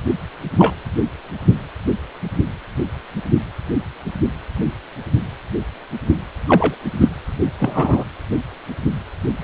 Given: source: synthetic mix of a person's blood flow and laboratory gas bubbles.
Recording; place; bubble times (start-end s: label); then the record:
Doppler ultrasound of blood flow; precordium
0.58-0.75 s: bubbles
6.47-6.75 s: bubbles
7.00-7.11 s: bubbles
7.59-8.04 s: bubbles
9.38-9.44 s: bubbles
From the record:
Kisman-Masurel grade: 123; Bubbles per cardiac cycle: 1 to 2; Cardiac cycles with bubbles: 10 to 50%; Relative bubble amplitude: loud (0.450 to 0.775); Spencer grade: 2 (many but less than half of the cardiac periods contain bubble signals, singularly or in groups); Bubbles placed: anywhere in the cardiac cycle